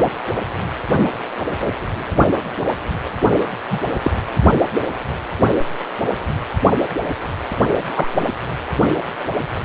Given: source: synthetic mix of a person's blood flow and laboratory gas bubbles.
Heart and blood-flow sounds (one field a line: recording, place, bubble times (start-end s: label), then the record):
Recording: Doppler ultrasound of blood flow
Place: precordium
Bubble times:
3.71-3.80 s: bubbles
4.04-4.11 s: bubbles
7.94-8.08 s: bubbles
From the record:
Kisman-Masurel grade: 123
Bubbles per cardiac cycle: 1 to 2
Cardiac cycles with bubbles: 10 to 50%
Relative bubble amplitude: loud (0.450 to 0.775)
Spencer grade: 2 (many but less than half of the cardiac periods contain bubble signals, singularly or in groups)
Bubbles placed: only in the low amplitude regions of the cardiac cycle